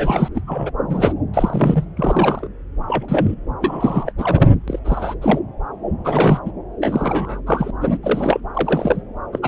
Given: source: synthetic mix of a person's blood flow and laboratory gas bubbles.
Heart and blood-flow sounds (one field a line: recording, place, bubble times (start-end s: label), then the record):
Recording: Doppler ultrasound of blood flow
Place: subclavian vein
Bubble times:
0.00-0.29 s: bubbles
0.34-0.41 s: bubbles
0.47-0.71 s: bubbles
0.89-1.13 s: bubbles
1.33-1.85 s: bubbles
1.97-2.48 s: bubbles
2.88-3.34 s: bubbles
3.60-4.11 s: bubbles
4.18-4.50 s: bubbles
4.67-4.79 s: bubbles
4.84-5.15 s: bubbles
5.21-5.39 s: bubbles
6.04-6.39 s: bubbles
6.45-6.51 s: bubbles
6.81-7.40 s: bubbles
7.46-7.71 s: bubbles
7.81-7.98 s: bubbles
8.03-8.40 s: bubbles
8.55-9.03 s: bubbles
9.32-9.39 s: bubbles
9.42-9.48 s: bubbles
From the record:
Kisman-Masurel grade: 243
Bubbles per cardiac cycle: several, 3 to 8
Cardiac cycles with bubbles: 100%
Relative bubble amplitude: loud (0.450 to 0.775)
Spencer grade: 3 (all of the cardiac periods contain showers or single bubble signals, but not dominating or overriding the cardiac motion signals)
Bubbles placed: anywhere in the cardiac cycle